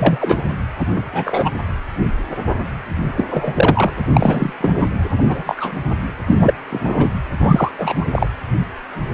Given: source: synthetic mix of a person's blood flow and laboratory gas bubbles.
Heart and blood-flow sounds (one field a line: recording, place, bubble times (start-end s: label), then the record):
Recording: Doppler ultrasound of blood flow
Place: precordium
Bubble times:
0.00-0.42 s: bubbles
0.79-0.87 s: bubbles
0.95-1.03 s: bubbles
1.12-1.50 s: bubbles
3.17-3.25 s: bubbles
3.30-3.91 s: bubbles
4.09-4.54 s: bubbles
4.61-4.74 s: bubbles
4.79-4.88 s: bubbles
5.18-5.23 s: bubbles
5.29-5.72 s: bubbles
6.27-6.54 s: bubbles
6.70-7.08 s: bubbles
7.40-7.72 s: bubbles
7.77-8.06 s: bubbles
8.11-8.28 s: bubbles
From the record:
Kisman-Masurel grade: 233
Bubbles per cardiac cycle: several, 3 to 8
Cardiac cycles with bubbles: 50 to 99%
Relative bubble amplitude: loud (0.450 to 0.775)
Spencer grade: 3 (all of the cardiac periods contain showers or single bubble signals, but not dominating or overriding the cardiac motion signals)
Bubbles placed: anywhere in the cardiac cycle